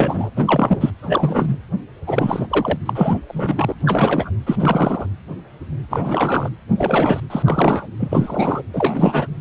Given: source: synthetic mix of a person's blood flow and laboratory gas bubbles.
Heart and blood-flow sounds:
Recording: Doppler ultrasound of blood flow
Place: precordium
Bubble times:
0.00-0.30 s: bubbles
0.36-0.91 s: bubbles
1.02-1.57 s: bubbles
2.07-2.79 s: bubbles
2.86-3.19 s: bubbles
3.28-3.75 s: bubbles
3.80-4.30 s: bubbles
4.46-4.55 s: bubbles
4.59-5.06 s: bubbles
5.90-6.49 s: bubbles
6.77-7.20 s: bubbles
7.30-7.42 s: bubbles
7.45-7.87 s: bubbles
7.99-8.62 s: bubbles
8.72-9.28 s: bubbles
From the record:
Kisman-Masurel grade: 333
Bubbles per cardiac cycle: rolling drumbeat, 9 or more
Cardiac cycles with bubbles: 50 to 99%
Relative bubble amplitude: loud (0.450 to 0.775)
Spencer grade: 3 (all of the cardiac periods contain showers or single bubble signals, but not dominating or overriding the cardiac motion signals)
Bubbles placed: anywhere in the cardiac cycle

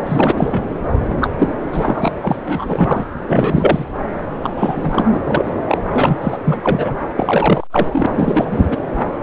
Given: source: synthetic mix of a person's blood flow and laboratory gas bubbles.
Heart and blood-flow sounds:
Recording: Doppler ultrasound of blood flow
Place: subclavian vein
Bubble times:
0.06-0.66 s: bubbles
1.10-1.15 s: bubbles
1.20-1.30 s: bubbles
1.38-1.53 s: bubbles
1.69-2.36 s: bubbles
2.47-3.06 s: bubbles
3.26-3.85 s: bubbles
4.43-4.50 s: bubbles
4.56-5.21 s: bubbles
5.25-5.54 s: bubbles
5.67-5.78 s: bubbles
5.89-6.17 s: bubbles
6.21-6.38 s: bubbles
6.44-6.60 s: bubbles
6.63-6.94 s: bubbles
7.16-8.06 s: bubbles
8.15-8.67 s: bubbles
8.70-8.82 s: bubbles
From the record:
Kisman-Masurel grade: 343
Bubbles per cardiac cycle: rolling drumbeat, 9 or more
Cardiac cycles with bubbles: 100%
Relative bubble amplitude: loud (0.450 to 0.775)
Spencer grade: 3 (all of the cardiac periods contain showers or single bubble signals, but not dominating or overriding the cardiac motion signals)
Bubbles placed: anywhere in the cardiac cycle

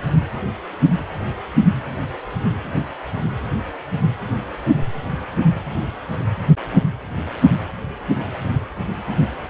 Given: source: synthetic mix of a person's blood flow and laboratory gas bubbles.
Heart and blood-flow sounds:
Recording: Doppler ultrasound of blood flow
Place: precordium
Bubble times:
no bubbles
From the record:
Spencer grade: 0 (complete lack of bubble signals)

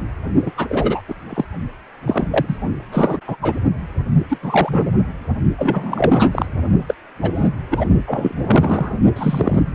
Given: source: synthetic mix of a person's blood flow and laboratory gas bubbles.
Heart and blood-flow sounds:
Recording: Doppler ultrasound of blood flow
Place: precordium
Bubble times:
0.46-0.52 s: bubbles
0.56-1.01 s: bubbles
1.08-1.14 s: bubbles
1.29-1.45 s: bubbles
2.07-2.28 s: bubbles
2.31-2.57 s: bubbles
2.92-3.18 s: bubbles
3.27-3.36 s: bubbles
3.42-3.53 s: bubbles
4.29-4.38 s: bubbles
4.42-4.96 s: bubbles
5.58-6.46 s: bubbles
6.88-6.94 s: bubbles
7.21-7.31 s: bubbles
7.35-7.48 s: bubbles
7.71-7.86 s: bubbles
8.06-8.93 s: bubbles
9.15-9.63 s: bubbles
From the record:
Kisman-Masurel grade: 233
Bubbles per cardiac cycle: several, 3 to 8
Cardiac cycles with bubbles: 50 to 99%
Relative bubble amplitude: loud (0.450 to 0.775)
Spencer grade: 3 (all of the cardiac periods contain showers or single bubble signals, but not dominating or overriding the cardiac motion signals)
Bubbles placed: only in the low amplitude regions of the cardiac cycle

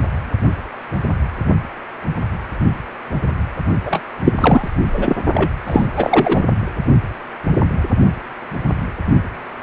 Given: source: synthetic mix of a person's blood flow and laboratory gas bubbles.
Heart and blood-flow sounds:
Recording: Doppler ultrasound of blood flow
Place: precordium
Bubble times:
3.85-4.00 s: bubbles
4.24-4.34 s: bubbles
4.40-4.68 s: bubbles
4.92-5.16 s: bubbles
5.34-5.50 s: bubbles
5.66-5.86 s: bubbles
5.96-6.44 s: bubbles
From the record:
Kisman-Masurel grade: 223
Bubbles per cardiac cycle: several, 3 to 8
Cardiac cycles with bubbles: 10 to 50%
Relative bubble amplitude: loud (0.450 to 0.775)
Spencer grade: 2 (many but less than half of the cardiac periods contain bubble signals, singularly or in groups)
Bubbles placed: only in the low amplitude regions of the cardiac cycle

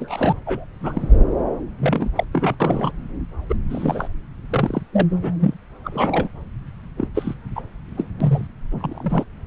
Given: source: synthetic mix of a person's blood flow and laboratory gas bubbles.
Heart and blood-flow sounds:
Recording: Doppler ultrasound of blood flow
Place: subclavian vein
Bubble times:
0.00-0.32 s: bubbles
0.46-0.65 s: bubbles
0.81-1.17 s: bubbles
1.79-2.10 s: bubbles
2.16-2.24 s: bubbles
2.33-2.56 s: bubbles
2.60-2.92 s: bubbles
3.49-3.56 s: bubbles
3.70-4.08 s: bubbles
4.50-4.82 s: bubbles
4.92-5.07 s: bubbles
5.15-5.35 s: bubbles
5.40-5.54 s: bubbles
5.84-6.29 s: bubbles
6.96-7.08 s: bubbles
7.15-7.34 s: bubbles
7.55-7.62 s: bubbles
7.97-8.08 s: bubbles
8.20-8.47 s: bubbles
8.71-9.24 s: bubbles
From the record:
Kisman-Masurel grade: 243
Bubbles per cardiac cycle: several, 3 to 8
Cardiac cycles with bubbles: 100%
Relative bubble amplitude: loud (0.450 to 0.775)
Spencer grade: 3 (all of the cardiac periods contain showers or single bubble signals, but not dominating or overriding the cardiac motion signals)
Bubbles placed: anywhere in the cardiac cycle

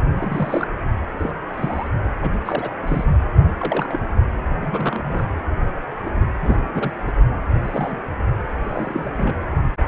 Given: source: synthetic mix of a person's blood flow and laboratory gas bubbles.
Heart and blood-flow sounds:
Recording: Doppler ultrasound of blood flow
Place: precordium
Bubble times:
0.14-0.67 s: bubbles
1.19-1.32 s: bubbles
1.53-1.88 s: bubbles
2.22-2.30 s: bubbles
2.45-2.69 s: bubbles
2.82-3.05 s: bubbles
3.58-4.00 s: bubbles
4.61-5.32 s: bubbles
6.05-6.11 s: bubbles
6.42-6.58 s: bubbles
6.74-6.93 s: bubbles
7.07-7.12 s: bubbles
7.63-7.99 s: bubbles
8.64-9.10 s: bubbles
9.17-9.35 s: bubbles
From the record:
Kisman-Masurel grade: 242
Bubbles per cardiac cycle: several, 3 to 8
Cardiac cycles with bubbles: 100%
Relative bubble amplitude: moderate (0.250 to 0.450)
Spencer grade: 3 (all of the cardiac periods contain showers or single bubble signals, but not dominating or overriding the cardiac motion signals)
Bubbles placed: only in the low amplitude regions of the cardiac cycle

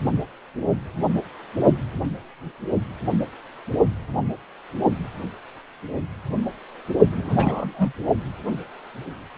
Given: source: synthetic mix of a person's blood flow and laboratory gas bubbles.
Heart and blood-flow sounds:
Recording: Doppler ultrasound of blood flow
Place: precordium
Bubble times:
7.11-7.92 s: bubbles
From the record:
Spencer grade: 1 (occasional bubble signal discernible with the cardiac motion signal, with majority of cardiac periods free of bubbles)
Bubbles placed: only in the low amplitude regions of the cardiac cycle

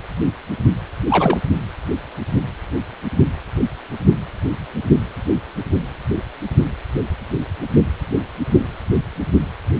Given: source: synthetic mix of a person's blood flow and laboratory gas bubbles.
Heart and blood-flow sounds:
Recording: Doppler ultrasound of blood flow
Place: precordium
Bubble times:
1.08-1.40 s: bubbles
From the record:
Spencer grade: 1 (occasional bubble signal discernible with the cardiac motion signal, with majority of cardiac periods free of bubbles)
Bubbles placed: only in the low amplitude regions of the cardiac cycle

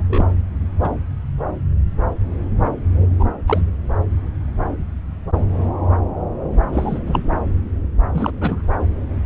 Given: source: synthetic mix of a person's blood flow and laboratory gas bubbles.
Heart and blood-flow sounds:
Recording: Doppler ultrasound of blood flow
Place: subclavian vein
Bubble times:
0.00-0.26 s: bubbles
0.82-0.93 s: bubbles
3.19-3.25 s: bubbles
3.47-3.62 s: bubbles
6.72-6.99 s: bubbles
7.06-7.21 s: bubbles
8.14-8.31 s: bubbles
8.40-8.62 s: bubbles
From the record:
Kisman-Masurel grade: 222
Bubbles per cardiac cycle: several, 3 to 8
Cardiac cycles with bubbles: 10 to 50%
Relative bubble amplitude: moderate (0.250 to 0.450)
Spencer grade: 2 (many but less than half of the cardiac periods contain bubble signals, singularly or in groups)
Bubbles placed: anywhere in the cardiac cycle

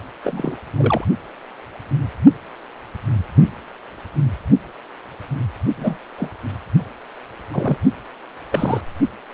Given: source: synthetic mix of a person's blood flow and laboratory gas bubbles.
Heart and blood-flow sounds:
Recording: Doppler ultrasound of blood flow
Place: precordium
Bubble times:
0.24-0.56 s: bubbles
0.77-1.05 s: bubbles
5.76-5.98 s: bubbles
6.17-6.30 s: bubbles
7.51-7.77 s: bubbles
8.51-8.81 s: bubbles
From the record:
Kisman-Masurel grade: 222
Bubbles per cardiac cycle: several, 3 to 8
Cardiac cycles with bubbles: 10 to 50%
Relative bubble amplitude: moderate (0.250 to 0.450)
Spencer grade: 2 (many but less than half of the cardiac periods contain bubble signals, singularly or in groups)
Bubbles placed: only in the low amplitude regions of the cardiac cycle

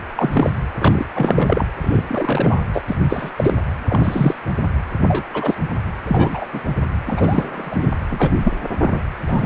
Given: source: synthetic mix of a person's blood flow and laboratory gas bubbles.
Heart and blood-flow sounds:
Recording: Doppler ultrasound of blood flow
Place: precordium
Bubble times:
0.15-0.50 s: bubbles
0.79-1.05 s: bubbles
1.14-1.65 s: bubbles
1.81-2.02 s: bubbles
2.07-2.64 s: bubbles
2.73-2.84 s: bubbles
2.88-2.96 s: bubbles
3.09-3.31 s: bubbles
3.36-3.54 s: bubbles
3.88-4.34 s: bubbles
5.02-5.23 s: bubbles
5.33-5.55 s: bubbles
6.07-6.46 s: bubbles
6.53-6.61 s: bubbles
7.07-7.90 s: bubbles
8.10-8.31 s: bubbles
8.43-8.53 s: bubbles
8.82-9.00 s: bubbles
9.27-9.46 s: bubbles
From the record:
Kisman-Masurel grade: 243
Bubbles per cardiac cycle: several, 3 to 8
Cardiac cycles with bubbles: 100%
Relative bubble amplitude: loud (0.450 to 0.775)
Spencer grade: 3 (all of the cardiac periods contain showers or single bubble signals, but not dominating or overriding the cardiac motion signals)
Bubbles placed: anywhere in the cardiac cycle

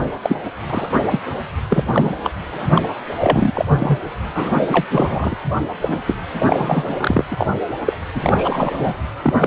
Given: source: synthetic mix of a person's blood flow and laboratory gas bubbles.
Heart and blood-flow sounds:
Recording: Doppler ultrasound of blood flow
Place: precordium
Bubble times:
0.00-0.05 s: bubbles
0.22-0.36 s: bubbles
0.69-0.89 s: bubbles
1.08-1.20 s: bubbles
1.70-1.84 s: bubbles
1.86-2.16 s: bubbles
2.24-2.30 s: bubbles
2.51-2.87 s: bubbles
3.21-3.65 s: bubbles
3.68-3.98 s: bubbles
4.33-4.87 s: bubbles
4.91-5.35 s: bubbles
5.81-6.02 s: bubbles
6.07-6.17 s: bubbles
6.39-7.25 s: bubbles
7.31-7.57 s: bubbles
7.86-7.93 s: bubbles
8.15-8.95 s: bubbles
9.22-9.47 s: bubbles
From the record:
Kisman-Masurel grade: 243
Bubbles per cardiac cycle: several, 3 to 8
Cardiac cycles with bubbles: 100%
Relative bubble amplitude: loud (0.450 to 0.775)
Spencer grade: 3 (all of the cardiac periods contain showers or single bubble signals, but not dominating or overriding the cardiac motion signals)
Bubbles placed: anywhere in the cardiac cycle

